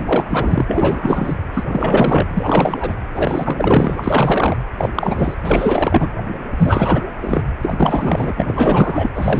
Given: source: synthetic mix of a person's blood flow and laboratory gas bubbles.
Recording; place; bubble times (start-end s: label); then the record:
Doppler ultrasound of blood flow; precordium
0.00-0.65 s: bubbles
0.67-1.35 s: bubbles
1.54-1.64 s: bubbles
1.69-2.27 s: bubbles
2.33-2.97 s: bubbles
3.12-4.57 s: bubbles
4.77-4.93 s: bubbles
4.95-5.35 s: bubbles
5.45-6.10 s: bubbles
6.57-7.05 s: bubbles
7.20-7.42 s: bubbles
7.62-8.33 s: bubbles
8.37-9.10 s: bubbles
9.14-9.40 s: bubbles
From the record:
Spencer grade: 4 (maximum detectable bubble signal sounding continuously throughout systole and diastole of every cardiac period, and overriding the amplitude of the normal cardiac signals); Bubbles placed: anywhere in the cardiac cycle